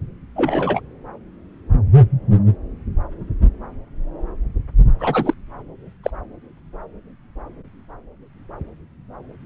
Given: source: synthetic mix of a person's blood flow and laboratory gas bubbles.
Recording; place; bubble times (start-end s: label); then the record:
Doppler ultrasound of blood flow; subclavian vein
0.36-0.81 s: bubbles
4.99-5.34 s: bubbles
6.04-6.11 s: bubbles
From the record:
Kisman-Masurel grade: 122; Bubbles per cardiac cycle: 1 to 2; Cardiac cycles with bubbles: 10 to 50%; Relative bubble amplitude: moderate (0.250 to 0.450); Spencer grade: 2 (many but less than half of the cardiac periods contain bubble signals, singularly or in groups); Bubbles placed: anywhere in the cardiac cycle